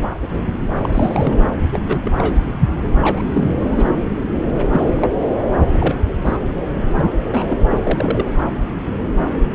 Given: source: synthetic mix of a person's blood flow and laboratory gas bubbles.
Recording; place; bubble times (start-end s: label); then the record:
Doppler ultrasound of blood flow; subclavian vein
0.82-0.89 s: bubbles
0.92-1.39 s: bubbles
1.71-2.00 s: bubbles
2.04-2.11 s: bubbles
2.17-2.42 s: bubbles
3.00-3.89 s: bubbles
4.72-4.87 s: bubbles
4.96-5.08 s: bubbles
5.72-5.95 s: bubbles
6.25-6.37 s: bubbles
6.88-7.12 s: bubbles
7.31-7.46 s: bubbles
7.48-7.58 s: bubbles
7.70-7.78 s: bubbles
7.83-8.25 s: bubbles
From the record:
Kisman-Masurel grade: 232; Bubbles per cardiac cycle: several, 3 to 8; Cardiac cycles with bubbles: 50 to 99%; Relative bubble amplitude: moderate (0.250 to 0.450); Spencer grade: 3 (all of the cardiac periods contain showers or single bubble signals, but not dominating or overriding the cardiac motion signals); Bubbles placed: anywhere in the cardiac cycle